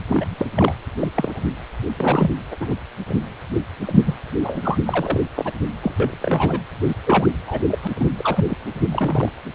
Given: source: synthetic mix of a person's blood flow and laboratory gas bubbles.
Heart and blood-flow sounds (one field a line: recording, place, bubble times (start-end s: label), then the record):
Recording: Doppler ultrasound of blood flow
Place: precordium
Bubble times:
0.07-0.46 s: bubbles
0.55-0.73 s: bubbles
1.01-1.08 s: bubbles
1.16-1.45 s: bubbles
1.97-2.30 s: bubbles
2.51-2.56 s: bubbles
2.60-2.76 s: bubbles
3.08-3.15 s: bubbles
3.86-4.14 s: bubbles
4.43-4.77 s: bubbles
4.85-5.20 s: bubbles
5.35-5.52 s: bubbles
5.83-5.94 s: bubbles
6.00-6.61 s: bubbles
6.88-6.95 s: bubbles
7.05-7.27 s: bubbles
7.47-7.63 s: bubbles
7.67-7.79 s: bubbles
7.83-7.88 s: bubbles
7.95-8.10 s: bubbles
8.16-8.45 s: bubbles
8.49-8.57 s: bubbles
8.92-9.29 s: bubbles
From the record:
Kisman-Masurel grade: 242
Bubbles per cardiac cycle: several, 3 to 8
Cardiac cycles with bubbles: 100%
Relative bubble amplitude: moderate (0.250 to 0.450)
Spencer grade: 3 (all of the cardiac periods contain showers or single bubble signals, but not dominating or overriding the cardiac motion signals)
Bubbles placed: anywhere in the cardiac cycle